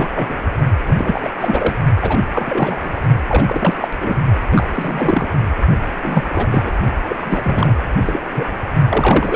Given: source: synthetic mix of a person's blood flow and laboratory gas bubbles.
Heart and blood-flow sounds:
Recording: Doppler ultrasound of blood flow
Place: precordium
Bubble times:
0.00-0.08 s: bubbles
0.14-0.42 s: bubbles
0.86-0.95 s: bubbles
0.98-1.30 s: bubbles
1.40-1.76 s: bubbles
1.99-2.20 s: bubbles
2.33-2.80 s: bubbles
2.84-3.01 s: bubbles
3.28-3.74 s: bubbles
3.80-3.88 s: bubbles
4.00-4.15 s: bubbles
4.51-4.67 s: bubbles
4.75-5.29 s: bubbles
6.00-6.46 s: bubbles
6.51-6.71 s: bubbles
7.08-7.17 s: bubbles
7.20-7.74 s: bubbles
8.02-8.20 s: bubbles
8.28-8.62 s: bubbles
8.90-9.36 s: bubbles
From the record:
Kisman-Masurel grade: 333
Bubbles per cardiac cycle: rolling drumbeat, 9 or more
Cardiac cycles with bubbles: 50 to 99%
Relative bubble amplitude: loud (0.450 to 0.775)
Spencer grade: 3 (all of the cardiac periods contain showers or single bubble signals, but not dominating or overriding the cardiac motion signals)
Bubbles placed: only in the low amplitude regions of the cardiac cycle

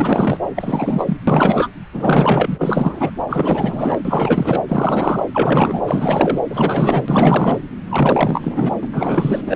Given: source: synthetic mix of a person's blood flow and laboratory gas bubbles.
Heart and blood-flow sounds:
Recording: Doppler ultrasound of blood flow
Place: subclavian vein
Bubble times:
0.00-0.40 s: bubbles
0.55-1.17 s: bubbles
1.27-1.68 s: bubbles
1.93-3.10 s: bubbles
3.28-3.97 s: bubbles
4.04-4.62 s: bubbles
4.67-5.23 s: bubbles
5.33-5.81 s: bubbles
5.87-6.41 s: bubbles
6.50-7.58 s: bubbles
7.89-8.74 s: bubbles
8.81-8.88 s: bubbles
8.93-9.41 s: bubbles
9.46-9.56 s: bubbles
From the record:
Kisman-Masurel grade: 444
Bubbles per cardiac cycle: continuous sound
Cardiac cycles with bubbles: 100%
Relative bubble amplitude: maximal (0.775 to 0.999)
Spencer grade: 4 (maximum detectable bubble signal sounding continuously throughout systole and diastole of every cardiac period, and overriding the amplitude of the normal cardiac signals)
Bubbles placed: anywhere in the cardiac cycle

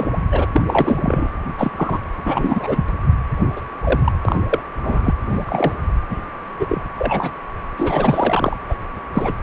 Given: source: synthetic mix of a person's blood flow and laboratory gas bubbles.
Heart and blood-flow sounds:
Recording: Doppler ultrasound of blood flow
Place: precordium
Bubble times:
0.00-0.10 s: bubbles
0.32-0.48 s: bubbles
0.53-1.30 s: bubbles
1.58-1.71 s: bubbles
1.77-1.99 s: bubbles
2.25-2.84 s: bubbles
3.56-3.61 s: bubbles
3.83-4.00 s: bubbles
4.04-4.12 s: bubbles
4.25-4.36 s: bubbles
4.49-4.62 s: bubbles
4.83-5.14 s: bubbles
5.28-5.75 s: bubbles
6.09-6.21 s: bubbles
6.58-6.66 s: bubbles
6.69-6.82 s: bubbles
6.99-7.30 s: bubbles
7.77-8.56 s: bubbles
8.69-8.75 s: bubbles
9.14-9.34 s: bubbles
From the record:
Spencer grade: 3 (all of the cardiac periods contain showers or single bubble signals, but not dominating or overriding the cardiac motion signals)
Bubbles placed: anywhere in the cardiac cycle

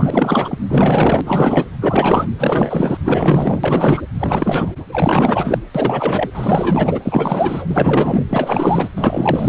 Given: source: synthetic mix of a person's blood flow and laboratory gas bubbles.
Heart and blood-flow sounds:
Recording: Doppler ultrasound of blood flow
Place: precordium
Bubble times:
0.00-0.57 s: bubbles
0.69-1.21 s: bubbles
1.25-1.68 s: bubbles
1.80-2.29 s: bubbles
2.38-2.97 s: bubbles
3.04-4.01 s: bubbles
4.19-4.72 s: bubbles
4.92-5.58 s: bubbles
5.75-6.29 s: bubbles
6.34-7.00 s: bubbles
7.05-8.25 s: bubbles
8.29-8.88 s: bubbles
8.96-9.49 s: bubbles
From the record:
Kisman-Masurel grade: 444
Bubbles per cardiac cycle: continuous sound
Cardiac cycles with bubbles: 100%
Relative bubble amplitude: maximal (0.775 to 0.999)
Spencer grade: 4 (maximum detectable bubble signal sounding continuously throughout systole and diastole of every cardiac period, and overriding the amplitude of the normal cardiac signals)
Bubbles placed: anywhere in the cardiac cycle

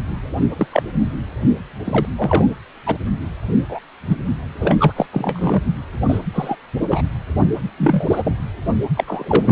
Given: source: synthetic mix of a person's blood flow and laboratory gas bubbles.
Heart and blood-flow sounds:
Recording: Doppler ultrasound of blood flow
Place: precordium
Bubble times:
0.41-0.46 s: bubbles
0.57-0.67 s: bubbles
0.72-0.82 s: bubbles
1.84-2.06 s: bubbles
2.17-2.55 s: bubbles
2.87-2.97 s: bubbles
3.69-3.79 s: bubbles
4.07-4.17 s: bubbles
4.60-4.76 s: bubbles
4.79-4.93 s: bubbles
4.96-5.06 s: bubbles
5.12-5.62 s: bubbles
6.08-6.19 s: bubbles
6.33-6.56 s: bubbles
6.90-7.02 s: bubbles
7.78-8.06 s: bubbles
8.09-8.33 s: bubbles
8.96-9.04 s: bubbles
9.06-9.51 s: bubbles
From the record:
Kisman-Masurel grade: 243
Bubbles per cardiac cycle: several, 3 to 8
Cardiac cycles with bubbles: 100%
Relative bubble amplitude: loud (0.450 to 0.775)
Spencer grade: 3 (all of the cardiac periods contain showers or single bubble signals, but not dominating or overriding the cardiac motion signals)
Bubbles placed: anywhere in the cardiac cycle

